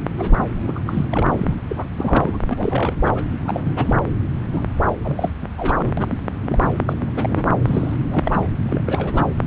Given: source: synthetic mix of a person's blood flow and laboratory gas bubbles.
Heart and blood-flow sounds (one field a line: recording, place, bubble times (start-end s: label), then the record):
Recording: Doppler ultrasound of blood flow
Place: subclavian vein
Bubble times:
0.18-0.39 s: bubbles
0.64-0.79 s: bubbles
0.86-1.06 s: bubbles
1.10-1.54 s: bubbles
1.69-1.84 s: bubbles
1.94-2.39 s: bubbles
2.49-2.96 s: bubbles
3.02-3.29 s: bubbles
3.45-3.73 s: bubbles
3.76-3.94 s: bubbles
4.53-4.65 s: bubbles
5.04-5.31 s: bubbles
5.42-5.48 s: bubbles
5.58-5.94 s: bubbles
5.97-6.18 s: bubbles
6.42-6.71 s: bubbles
6.89-6.98 s: bubbles
7.00-7.10 s: bubbles
7.14-7.55 s: bubbles
7.65-7.98 s: bubbles
8.05-8.47 s: bubbles
8.62-9.26 s: bubbles
From the record:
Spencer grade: 3 (all of the cardiac periods contain showers or single bubble signals, but not dominating or overriding the cardiac motion signals)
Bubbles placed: anywhere in the cardiac cycle